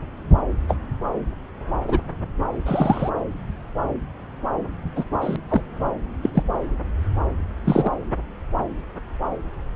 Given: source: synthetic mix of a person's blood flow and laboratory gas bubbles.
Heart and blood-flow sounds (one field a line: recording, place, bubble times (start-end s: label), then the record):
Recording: Doppler ultrasound of blood flow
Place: subclavian vein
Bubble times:
0.69-0.76 s: bubbles
1.88-2.02 s: bubbles
2.65-3.10 s: bubbles
4.95-5.04 s: bubbles
5.21-5.36 s: bubbles
5.49-5.61 s: bubbles
6.22-6.29 s: bubbles
6.33-6.43 s: bubbles
7.64-7.95 s: bubbles
From the record:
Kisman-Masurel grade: 123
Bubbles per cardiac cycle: 1 to 2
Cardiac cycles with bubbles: 10 to 50%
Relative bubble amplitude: loud (0.450 to 0.775)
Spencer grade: 2 (many but less than half of the cardiac periods contain bubble signals, singularly or in groups)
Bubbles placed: anywhere in the cardiac cycle